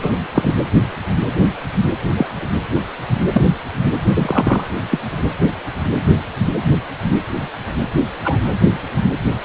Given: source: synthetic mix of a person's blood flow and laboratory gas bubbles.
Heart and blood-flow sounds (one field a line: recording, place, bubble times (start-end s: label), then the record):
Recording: Doppler ultrasound of blood flow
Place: precordium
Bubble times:
0.02-0.11 s: bubbles
0.33-0.54 s: bubbles
2.17-2.27 s: bubbles
3.33-3.42 s: bubbles
4.15-4.62 s: bubbles
4.91-4.99 s: bubbles
8.24-8.38 s: bubbles
From the record:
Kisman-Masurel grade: 123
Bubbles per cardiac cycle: 1 to 2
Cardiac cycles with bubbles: 10 to 50%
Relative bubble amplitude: loud (0.450 to 0.775)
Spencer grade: 2 (many but less than half of the cardiac periods contain bubble signals, singularly or in groups)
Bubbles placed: anywhere in the cardiac cycle